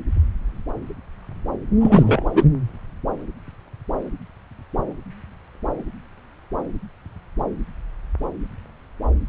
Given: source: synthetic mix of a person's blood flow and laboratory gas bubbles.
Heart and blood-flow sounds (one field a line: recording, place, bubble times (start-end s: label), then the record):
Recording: Doppler ultrasound of blood flow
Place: subclavian vein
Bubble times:
1.80-2.24 s: bubbles
2.27-2.46 s: bubbles
From the record:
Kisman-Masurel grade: 213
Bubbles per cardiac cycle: several, 3 to 8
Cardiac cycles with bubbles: 1 to 10%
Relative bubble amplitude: loud (0.450 to 0.775)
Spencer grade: 1 (occasional bubble signal discernible with the cardiac motion signal, with majority of cardiac periods free of bubbles)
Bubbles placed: anywhere in the cardiac cycle